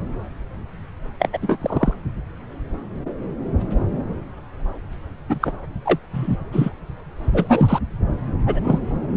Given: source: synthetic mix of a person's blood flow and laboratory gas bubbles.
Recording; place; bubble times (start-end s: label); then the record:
Doppler ultrasound of blood flow; subclavian vein
1.19-1.30 s: bubbles
1.33-1.39 s: bubbles
1.41-1.58 s: bubbles
1.61-1.94 s: bubbles
5.29-5.52 s: bubbles
5.84-5.99 s: bubbles
6.13-6.37 s: bubbles
6.52-6.70 s: bubbles
7.33-7.79 s: bubbles
8.46-8.60 s: bubbles
8.63-8.79 s: bubbles
From the record:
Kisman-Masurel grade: 223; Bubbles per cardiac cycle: several, 3 to 8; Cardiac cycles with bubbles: 10 to 50%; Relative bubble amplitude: loud (0.450 to 0.775); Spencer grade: 2 (many but less than half of the cardiac periods contain bubble signals, singularly or in groups); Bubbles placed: anywhere in the cardiac cycle